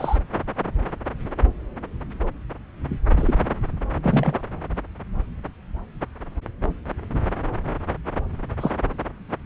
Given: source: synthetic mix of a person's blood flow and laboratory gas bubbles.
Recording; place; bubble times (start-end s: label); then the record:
Doppler ultrasound of blood flow; subclavian vein
0.00-0.17 s: bubbles
3.17-3.35 s: bubbles
4.03-4.42 s: bubbles
8.60-8.71 s: bubbles
From the record:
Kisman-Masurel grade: 122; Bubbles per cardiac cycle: 1 to 2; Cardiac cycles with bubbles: 10 to 50%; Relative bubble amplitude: moderate (0.250 to 0.450); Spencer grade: 2 (many but less than half of the cardiac periods contain bubble signals, singularly or in groups); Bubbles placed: anywhere in the cardiac cycle